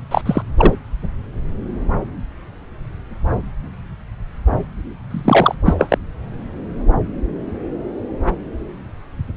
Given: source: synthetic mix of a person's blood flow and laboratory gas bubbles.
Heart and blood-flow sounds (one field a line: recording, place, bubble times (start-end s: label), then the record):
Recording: Doppler ultrasound of blood flow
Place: subclavian vein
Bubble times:
0.11-0.21 s: bubbles
0.26-0.42 s: bubbles
0.57-0.75 s: bubbles
5.11-5.55 s: bubbles
5.65-5.75 s: bubbles
5.78-5.98 s: bubbles
From the record:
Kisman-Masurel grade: 223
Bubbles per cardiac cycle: several, 3 to 8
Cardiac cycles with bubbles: 10 to 50%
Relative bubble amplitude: loud (0.450 to 0.775)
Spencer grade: 2 (many but less than half of the cardiac periods contain bubble signals, singularly or in groups)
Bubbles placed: anywhere in the cardiac cycle